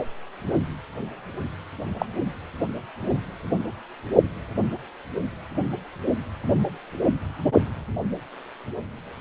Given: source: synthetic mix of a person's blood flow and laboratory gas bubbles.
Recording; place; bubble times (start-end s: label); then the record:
Doppler ultrasound of blood flow; precordium
1.99-2.05 s: bubbles
From the record:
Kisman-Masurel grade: 112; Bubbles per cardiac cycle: 1 to 2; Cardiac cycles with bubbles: 1 to 10%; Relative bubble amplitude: moderate (0.250 to 0.450); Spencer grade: 1 (occasional bubble signal discernible with the cardiac motion signal, with majority of cardiac periods free of bubbles); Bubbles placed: only in the low amplitude regions of the cardiac cycle